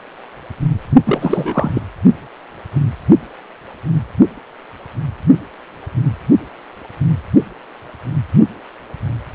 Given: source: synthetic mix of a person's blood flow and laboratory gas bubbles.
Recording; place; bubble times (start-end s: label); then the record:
Doppler ultrasound of blood flow; precordium
1.04-1.81 s: bubbles
From the record:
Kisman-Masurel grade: 213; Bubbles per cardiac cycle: several, 3 to 8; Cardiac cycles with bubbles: 1 to 10%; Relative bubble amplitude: loud (0.450 to 0.775); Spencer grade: 1 (occasional bubble signal discernible with the cardiac motion signal, with majority of cardiac periods free of bubbles); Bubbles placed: anywhere in the cardiac cycle